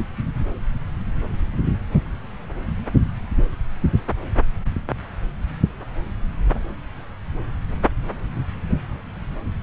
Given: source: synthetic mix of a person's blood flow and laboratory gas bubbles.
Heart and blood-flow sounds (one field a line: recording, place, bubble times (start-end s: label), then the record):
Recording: Doppler ultrasound of blood flow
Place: subclavian vein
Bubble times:
0.00-0.02 s: bubbles
From the record:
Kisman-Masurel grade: 112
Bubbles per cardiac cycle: 1 to 2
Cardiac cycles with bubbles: 1 to 10%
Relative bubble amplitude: moderate (0.250 to 0.450)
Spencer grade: 1 (occasional bubble signal discernible with the cardiac motion signal, with majority of cardiac periods free of bubbles)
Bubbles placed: anywhere in the cardiac cycle